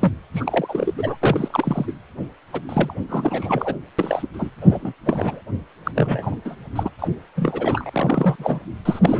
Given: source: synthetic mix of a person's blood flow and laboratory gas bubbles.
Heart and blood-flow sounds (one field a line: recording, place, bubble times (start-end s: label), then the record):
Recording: Doppler ultrasound of blood flow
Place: precordium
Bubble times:
0.00-0.12 s: bubbles
0.33-0.93 s: bubbles
0.97-1.17 s: bubbles
1.21-1.92 s: bubbles
2.52-2.61 s: bubbles
2.69-2.94 s: bubbles
3.09-3.75 s: bubbles
3.98-4.27 s: bubbles
4.33-4.50 s: bubbles
4.62-4.93 s: bubbles
5.05-5.42 s: bubbles
5.85-5.92 s: bubbles
5.95-6.42 s: bubbles
6.45-6.57 s: bubbles
6.75-6.91 s: bubbles
6.99-7.08 s: bubbles
7.36-8.35 s: bubbles
8.38-8.59 s: bubbles
8.85-9.20 s: bubbles
From the record:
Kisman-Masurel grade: 342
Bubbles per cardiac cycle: rolling drumbeat, 9 or more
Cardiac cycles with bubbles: 100%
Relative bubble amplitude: moderate (0.250 to 0.450)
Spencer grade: 3 (all of the cardiac periods contain showers or single bubble signals, but not dominating or overriding the cardiac motion signals)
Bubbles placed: anywhere in the cardiac cycle